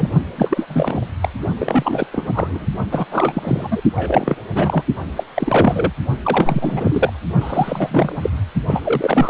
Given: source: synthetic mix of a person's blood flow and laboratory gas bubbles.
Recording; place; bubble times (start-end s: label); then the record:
Doppler ultrasound of blood flow; precordium
0.00-0.09 s: bubbles
0.37-1.05 s: bubbles
1.20-1.28 s: bubbles
1.58-2.06 s: bubbles
2.12-2.67 s: bubbles
2.91-3.06 s: bubbles
3.11-3.81 s: bubbles
3.94-4.35 s: bubbles
4.54-4.83 s: bubbles
5.16-5.24 s: bubbles
5.34-5.93 s: bubbles
6.22-7.13 s: bubbles
7.41-8.19 s: bubbles
8.21-8.29 s: bubbles
8.66-9.30 s: bubbles
From the record:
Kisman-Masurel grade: 343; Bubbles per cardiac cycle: rolling drumbeat, 9 or more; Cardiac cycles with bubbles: 100%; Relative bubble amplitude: loud (0.450 to 0.775); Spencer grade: 3 (all of the cardiac periods contain showers or single bubble signals, but not dominating or overriding the cardiac motion signals); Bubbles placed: only in the low amplitude regions of the cardiac cycle